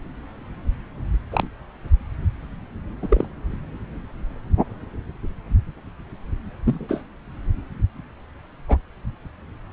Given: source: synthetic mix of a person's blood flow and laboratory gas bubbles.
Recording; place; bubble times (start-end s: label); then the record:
Doppler ultrasound of blood flow; subclavian vein
1.31-1.47 s: bubbles
3.02-3.27 s: bubbles
6.65-7.03 s: bubbles
8.68-8.77 s: bubbles
From the record:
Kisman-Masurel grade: 123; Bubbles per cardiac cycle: 1 to 2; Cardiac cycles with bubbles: 10 to 50%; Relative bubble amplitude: loud (0.450 to 0.775); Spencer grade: 2 (many but less than half of the cardiac periods contain bubble signals, singularly or in groups); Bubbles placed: anywhere in the cardiac cycle